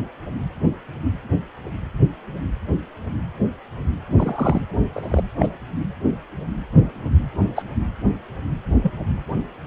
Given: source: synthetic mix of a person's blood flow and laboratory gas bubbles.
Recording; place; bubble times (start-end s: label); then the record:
Doppler ultrasound of blood flow; precordium
4.17-4.64 s: bubbles
4.93-5.21 s: bubbles
5.39-5.49 s: bubbles
7.55-7.63 s: bubbles
8.83-8.91 s: bubbles
From the record:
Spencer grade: 2 (many but less than half of the cardiac periods contain bubble signals, singularly or in groups); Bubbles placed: anywhere in the cardiac cycle